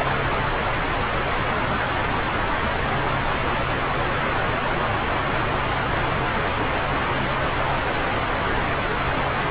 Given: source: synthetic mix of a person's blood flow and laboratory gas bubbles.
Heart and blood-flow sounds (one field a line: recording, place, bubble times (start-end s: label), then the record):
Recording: Doppler ultrasound of blood flow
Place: subclavian vein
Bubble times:
0.00-0.11 s: bubbles
From the record:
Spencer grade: 1 (occasional bubble signal discernible with the cardiac motion signal, with majority of cardiac periods free of bubbles)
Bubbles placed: anywhere in the cardiac cycle